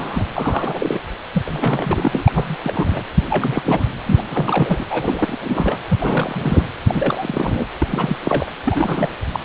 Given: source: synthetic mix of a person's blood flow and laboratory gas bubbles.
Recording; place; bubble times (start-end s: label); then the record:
Doppler ultrasound of blood flow; precordium
0.00-0.26 s: bubbles
0.34-0.99 s: bubbles
1.32-1.43 s: bubbles
1.46-2.56 s: bubbles
2.63-3.04 s: bubbles
3.29-3.85 s: bubbles
4.06-4.23 s: bubbles
4.30-4.85 s: bubbles
4.90-5.77 s: bubbles
5.90-5.98 s: bubbles
6.00-6.64 s: bubbles
6.85-7.66 s: bubbles
7.82-8.16 s: bubbles
8.23-8.50 s: bubbles
8.65-9.08 s: bubbles
9.32-9.39 s: bubbles
From the record:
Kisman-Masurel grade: 342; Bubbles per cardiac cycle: rolling drumbeat, 9 or more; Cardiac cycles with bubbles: 100%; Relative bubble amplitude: moderate (0.250 to 0.450); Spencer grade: 3 (all of the cardiac periods contain showers or single bubble signals, but not dominating or overriding the cardiac motion signals); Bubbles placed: anywhere in the cardiac cycle